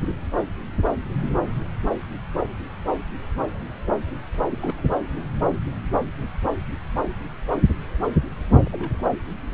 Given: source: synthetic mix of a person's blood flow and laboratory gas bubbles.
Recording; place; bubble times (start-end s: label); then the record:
Doppler ultrasound of blood flow; subclavian vein
4.50-4.81 s: bubbles
8.66-9.10 s: bubbles
From the record:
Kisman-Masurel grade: 111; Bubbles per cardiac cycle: 1 to 2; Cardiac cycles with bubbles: 1 to 10%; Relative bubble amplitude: barely perceptible (0.100 to 0.250); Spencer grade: 1 (occasional bubble signal discernible with the cardiac motion signal, with majority of cardiac periods free of bubbles); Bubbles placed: anywhere in the cardiac cycle